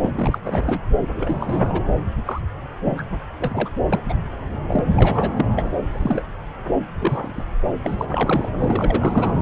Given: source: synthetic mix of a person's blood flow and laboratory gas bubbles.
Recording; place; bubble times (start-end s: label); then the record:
Doppler ultrasound of blood flow; subclavian vein
0.02-0.38 s: bubbles
0.45-0.81 s: bubbles
1.15-1.80 s: bubbles
2.25-2.41 s: bubbles
2.85-3.03 s: bubbles
3.40-3.69 s: bubbles
3.89-4.00 s: bubbles
4.08-4.15 s: bubbles
4.67-4.84 s: bubbles
4.95-5.47 s: bubbles
5.56-5.71 s: bubbles
5.89-6.25 s: bubbles
6.99-7.43 s: bubbles
7.83-8.49 s: bubbles
8.60-9.35 s: bubbles
From the record:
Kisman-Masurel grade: 232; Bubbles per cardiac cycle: several, 3 to 8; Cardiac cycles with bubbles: 50 to 99%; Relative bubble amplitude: moderate (0.250 to 0.450); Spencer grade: 3 (all of the cardiac periods contain showers or single bubble signals, but not dominating or overriding the cardiac motion signals); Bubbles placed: anywhere in the cardiac cycle